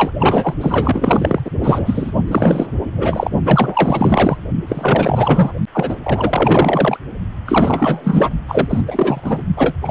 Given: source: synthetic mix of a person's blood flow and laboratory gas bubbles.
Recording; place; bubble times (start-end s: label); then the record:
Doppler ultrasound of blood flow; precordium
0.00-0.11 s: bubbles
0.19-0.54 s: bubbles
0.61-1.40 s: bubbles
1.45-1.50 s: bubbles
1.61-2.11 s: bubbles
2.27-2.67 s: bubbles
2.98-3.30 s: bubbles
3.44-4.38 s: bubbles
4.67-5.53 s: bubbles
5.72-5.96 s: bubbles
6.03-6.97 s: bubbles
7.45-8.30 s: bubbles
8.48-8.82 s: bubbles
8.87-9.46 s: bubbles
9.57-9.75 s: bubbles
9.82-9.91 s: bubbles
From the record:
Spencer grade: 4 (maximum detectable bubble signal sounding continuously throughout systole and diastole of every cardiac period, and overriding the amplitude of the normal cardiac signals); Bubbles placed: only in the low amplitude regions of the cardiac cycle